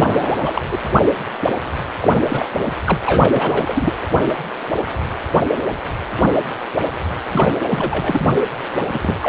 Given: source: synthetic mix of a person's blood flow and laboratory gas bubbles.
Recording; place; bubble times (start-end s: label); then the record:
Doppler ultrasound of blood flow; precordium
0.00-0.61 s: bubbles
0.71-0.78 s: bubbles
2.02-2.46 s: bubbles
2.85-2.98 s: bubbles
3.06-3.93 s: bubbles
7.30-7.51 s: bubbles
7.63-8.27 s: bubbles
8.91-9.18 s: bubbles
9.21-9.29 s: bubbles
From the record:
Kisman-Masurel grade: 332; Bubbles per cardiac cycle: rolling drumbeat, 9 or more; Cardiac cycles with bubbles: 50 to 99%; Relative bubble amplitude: moderate (0.250 to 0.450); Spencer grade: 3 (all of the cardiac periods contain showers or single bubble signals, but not dominating or overriding the cardiac motion signals); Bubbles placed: anywhere in the cardiac cycle